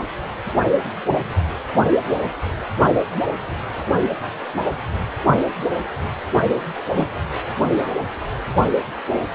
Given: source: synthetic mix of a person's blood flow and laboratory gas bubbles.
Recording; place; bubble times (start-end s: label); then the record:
Doppler ultrasound of blood flow; precordium
6.94-7.07 s: bubbles
From the record:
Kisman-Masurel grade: 113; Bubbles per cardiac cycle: 1 to 2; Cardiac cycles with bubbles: 1 to 10%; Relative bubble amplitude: loud (0.450 to 0.775); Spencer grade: 1 (occasional bubble signal discernible with the cardiac motion signal, with majority of cardiac periods free of bubbles); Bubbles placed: anywhere in the cardiac cycle